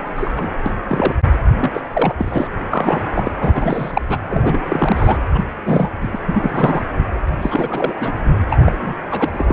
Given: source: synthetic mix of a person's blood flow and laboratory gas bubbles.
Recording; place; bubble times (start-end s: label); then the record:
Doppler ultrasound of blood flow; precordium
0.16-0.49 s: bubbles
0.66-0.71 s: bubbles
0.88-1.15 s: bubbles
1.58-1.81 s: bubbles
1.93-2.15 s: bubbles
2.17-2.48 s: bubbles
2.72-3.03 s: bubbles
3.13-3.31 s: bubbles
3.40-4.02 s: bubbles
4.10-4.17 s: bubbles
4.28-4.64 s: bubbles
4.66-5.18 s: bubbles
5.33-5.45 s: bubbles
5.65-6.08 s: bubbles
6.12-6.19 s: bubbles
6.27-6.83 s: bubbles
7.42-8.12 s: bubbles
8.49-8.59 s: bubbles
8.62-8.76 s: bubbles
8.82-8.94 s: bubbles
9.10-9.53 s: bubbles
From the record:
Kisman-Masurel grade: 343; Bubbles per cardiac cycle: rolling drumbeat, 9 or more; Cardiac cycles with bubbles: 100%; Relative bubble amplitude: loud (0.450 to 0.775); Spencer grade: 3 (all of the cardiac periods contain showers or single bubble signals, but not dominating or overriding the cardiac motion signals); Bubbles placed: anywhere in the cardiac cycle